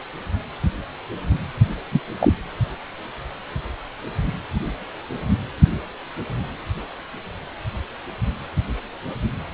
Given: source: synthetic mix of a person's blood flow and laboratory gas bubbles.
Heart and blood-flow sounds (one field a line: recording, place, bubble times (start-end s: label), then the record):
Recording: Doppler ultrasound of blood flow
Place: precordium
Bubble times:
1.91-2.00 s: bubbles
2.20-2.33 s: bubbles
From the record:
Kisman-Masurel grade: 113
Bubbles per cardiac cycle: 1 to 2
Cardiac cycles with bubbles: 1 to 10%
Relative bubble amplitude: loud (0.450 to 0.775)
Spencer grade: 1 (occasional bubble signal discernible with the cardiac motion signal, with majority of cardiac periods free of bubbles)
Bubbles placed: anywhere in the cardiac cycle